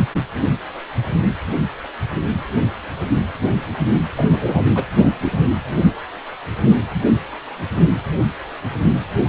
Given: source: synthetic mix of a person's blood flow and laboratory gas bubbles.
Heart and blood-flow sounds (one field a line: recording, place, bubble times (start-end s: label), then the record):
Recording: Doppler ultrasound of blood flow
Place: precordium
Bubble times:
4.17-4.64 s: bubbles
4.75-4.86 s: bubbles
4.97-5.12 s: bubbles
5.22-5.32 s: bubbles
From the record:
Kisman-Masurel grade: 213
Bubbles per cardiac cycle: several, 3 to 8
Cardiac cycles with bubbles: 1 to 10%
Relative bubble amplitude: loud (0.450 to 0.775)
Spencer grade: 1 (occasional bubble signal discernible with the cardiac motion signal, with majority of cardiac periods free of bubbles)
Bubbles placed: anywhere in the cardiac cycle